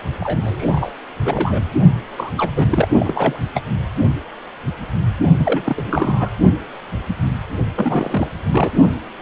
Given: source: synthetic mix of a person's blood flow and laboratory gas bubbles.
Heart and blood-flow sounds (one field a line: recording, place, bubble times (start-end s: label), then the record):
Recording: Doppler ultrasound of blood flow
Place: precordium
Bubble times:
0.22-0.92 s: bubbles
1.25-1.65 s: bubbles
2.17-2.31 s: bubbles
2.37-2.50 s: bubbles
2.56-2.67 s: bubbles
2.71-2.88 s: bubbles
2.96-3.37 s: bubbles
3.54-3.63 s: bubbles
5.38-5.83 s: bubbles
5.86-6.29 s: bubbles
7.75-8.29 s: bubbles
8.51-8.70 s: bubbles
From the record:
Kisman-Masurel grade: 332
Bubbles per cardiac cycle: rolling drumbeat, 9 or more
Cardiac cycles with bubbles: 50 to 99%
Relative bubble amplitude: moderate (0.250 to 0.450)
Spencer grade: 3 (all of the cardiac periods contain showers or single bubble signals, but not dominating or overriding the cardiac motion signals)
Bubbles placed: only in the low amplitude regions of the cardiac cycle